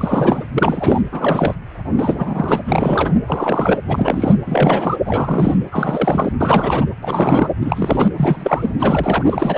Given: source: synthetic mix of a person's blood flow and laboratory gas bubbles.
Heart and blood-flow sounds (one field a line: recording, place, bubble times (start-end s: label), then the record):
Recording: Doppler ultrasound of blood flow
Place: precordium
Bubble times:
0.00-0.45 s: bubbles
0.53-1.01 s: bubbles
1.11-1.55 s: bubbles
1.96-2.60 s: bubbles
2.65-3.15 s: bubbles
3.27-3.79 s: bubbles
3.88-4.35 s: bubbles
4.46-4.97 s: bubbles
5.06-5.61 s: bubbles
5.72-6.33 s: bubbles
6.40-6.85 s: bubbles
7.02-7.50 s: bubbles
7.61-8.08 s: bubbles
8.17-8.70 s: bubbles
8.79-9.57 s: bubbles
From the record:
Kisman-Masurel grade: 343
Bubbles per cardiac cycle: rolling drumbeat, 9 or more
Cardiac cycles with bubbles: 100%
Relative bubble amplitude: loud (0.450 to 0.775)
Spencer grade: 3 (all of the cardiac periods contain showers or single bubble signals, but not dominating or overriding the cardiac motion signals)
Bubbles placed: anywhere in the cardiac cycle